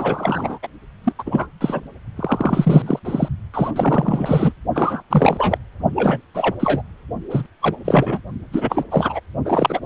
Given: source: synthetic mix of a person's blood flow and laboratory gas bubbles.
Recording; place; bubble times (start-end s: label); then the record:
Doppler ultrasound of blood flow; precordium
0.00-0.58 s: bubbles
0.62-0.67 s: bubbles
1.04-1.12 s: bubbles
1.18-1.23 s: bubbles
1.26-1.48 s: bubbles
1.60-1.81 s: bubbles
2.16-3.00 s: bubbles
3.04-3.29 s: bubbles
3.54-3.71 s: bubbles
3.76-4.52 s: bubbles
4.74-5.02 s: bubbles
5.10-5.58 s: bubbles
5.95-6.21 s: bubbles
6.34-6.55 s: bubbles
6.59-6.82 s: bubbles
7.29-7.46 s: bubbles
7.61-7.76 s: bubbles
7.84-8.20 s: bubbles
8.53-8.84 s: bubbles
8.91-9.20 s: bubbles
9.45-9.80 s: bubbles
From the record:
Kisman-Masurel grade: 343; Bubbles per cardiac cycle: rolling drumbeat, 9 or more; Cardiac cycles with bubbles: 100%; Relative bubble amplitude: loud (0.450 to 0.775); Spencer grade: 3 (all of the cardiac periods contain showers or single bubble signals, but not dominating or overriding the cardiac motion signals); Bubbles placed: only in the low amplitude regions of the cardiac cycle